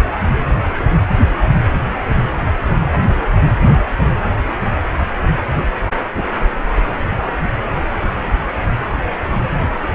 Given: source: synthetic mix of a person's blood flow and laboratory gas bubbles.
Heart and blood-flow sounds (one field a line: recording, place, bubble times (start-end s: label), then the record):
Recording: Doppler ultrasound of blood flow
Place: precordium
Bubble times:
3.60-3.87 s: bubbles
3.98-4.17 s: bubbles
From the record:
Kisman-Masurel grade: 211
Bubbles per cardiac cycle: several, 3 to 8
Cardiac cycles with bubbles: 1 to 10%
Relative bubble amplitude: barely perceptible (0.100 to 0.250)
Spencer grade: 1 (occasional bubble signal discernible with the cardiac motion signal, with majority of cardiac periods free of bubbles)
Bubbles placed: anywhere in the cardiac cycle